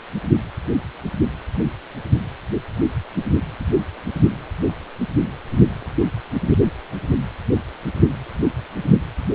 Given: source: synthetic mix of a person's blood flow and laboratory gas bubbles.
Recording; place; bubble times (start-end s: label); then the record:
Doppler ultrasound of blood flow; precordium
no bubbles
From the record:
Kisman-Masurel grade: 000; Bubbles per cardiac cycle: 0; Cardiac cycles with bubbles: 0%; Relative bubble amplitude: no bubbles discernible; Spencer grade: 0 (complete lack of bubble signals)